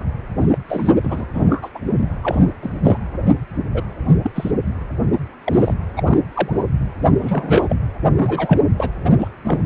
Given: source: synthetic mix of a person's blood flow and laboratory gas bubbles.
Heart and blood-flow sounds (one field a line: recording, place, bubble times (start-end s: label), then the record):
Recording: Doppler ultrasound of blood flow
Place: precordium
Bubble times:
0.41-0.46 s: bubbles
0.52-0.58 s: bubbles
0.69-0.92 s: bubbles
1.03-1.25 s: bubbles
1.34-1.69 s: bubbles
1.75-1.79 s: bubbles
1.91-2.06 s: bubbles
2.21-2.48 s: bubbles
2.61-2.80 s: bubbles
2.83-2.98 s: bubbles
3.74-3.81 s: bubbles
4.07-4.15 s: bubbles
4.23-4.30 s: bubbles
4.34-4.51 s: bubbles
5.44-5.74 s: bubbles
5.96-6.02 s: bubbles
6.05-6.20 s: bubbles
6.33-6.62 s: bubbles
7.21-7.76 s: bubbles
8.16-8.60 s: bubbles
8.76-8.90 s: bubbles
9.04-9.10 s: bubbles
9.18-9.28 s: bubbles
9.44-9.66 s: bubbles
From the record:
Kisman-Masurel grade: 242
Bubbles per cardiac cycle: several, 3 to 8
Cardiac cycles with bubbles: 100%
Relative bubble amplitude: moderate (0.250 to 0.450)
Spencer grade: 3 (all of the cardiac periods contain showers or single bubble signals, but not dominating or overriding the cardiac motion signals)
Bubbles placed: anywhere in the cardiac cycle